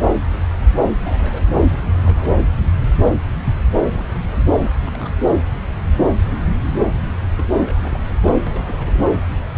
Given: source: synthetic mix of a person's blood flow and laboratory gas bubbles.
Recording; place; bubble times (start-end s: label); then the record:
Doppler ultrasound of blood flow; subclavian vein
1.01-1.81 s: bubbles
2.02-2.31 s: bubbles
2.62-2.88 s: bubbles
3.85-4.04 s: bubbles
4.16-4.21 s: bubbles
4.25-4.50 s: bubbles
4.63-4.77 s: bubbles
4.80-5.11 s: bubbles
7.38-7.49 s: bubbles
7.52-7.56 s: bubbles
7.62-8.13 s: bubbles
8.22-9.04 s: bubbles
From the record:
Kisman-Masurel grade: 221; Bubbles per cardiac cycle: several, 3 to 8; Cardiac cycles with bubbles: 10 to 50%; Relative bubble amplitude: barely perceptible (0.100 to 0.250); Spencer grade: 2 (many but less than half of the cardiac periods contain bubble signals, singularly or in groups); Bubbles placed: anywhere in the cardiac cycle